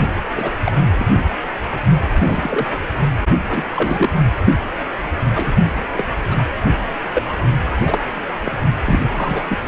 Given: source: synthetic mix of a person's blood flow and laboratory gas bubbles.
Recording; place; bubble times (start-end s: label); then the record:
Doppler ultrasound of blood flow; precordium
0.36-0.50 s: bubbles
0.65-0.72 s: bubbles
0.98-1.24 s: bubbles
2.11-2.65 s: bubbles
3.47-4.13 s: bubbles
4.45-4.53 s: bubbles
5.35-5.53 s: bubbles
5.93-6.07 s: bubbles
6.30-6.45 s: bubbles
7.13-7.23 s: bubbles
7.28-7.33 s: bubbles
7.75-8.04 s: bubbles
8.44-8.51 s: bubbles
8.85-9.00 s: bubbles
9.15-9.43 s: bubbles
9.49-9.58 s: bubbles
From the record:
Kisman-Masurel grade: 242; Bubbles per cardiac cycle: several, 3 to 8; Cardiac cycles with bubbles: 100%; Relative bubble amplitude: moderate (0.250 to 0.450); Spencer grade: 3 (all of the cardiac periods contain showers or single bubble signals, but not dominating or overriding the cardiac motion signals); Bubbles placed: only in the low amplitude regions of the cardiac cycle